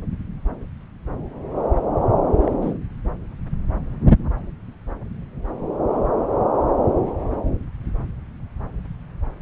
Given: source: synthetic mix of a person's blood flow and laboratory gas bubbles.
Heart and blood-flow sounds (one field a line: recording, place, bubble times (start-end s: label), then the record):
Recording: Doppler ultrasound of blood flow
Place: subclavian vein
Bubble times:
2.44-2.52 s: bubbles
2.62-2.74 s: bubbles
From the record:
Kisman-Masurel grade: 112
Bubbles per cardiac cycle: 1 to 2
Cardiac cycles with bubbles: 1 to 10%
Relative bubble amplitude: moderate (0.250 to 0.450)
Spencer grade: 1 (occasional bubble signal discernible with the cardiac motion signal, with majority of cardiac periods free of bubbles)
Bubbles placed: anywhere in the cardiac cycle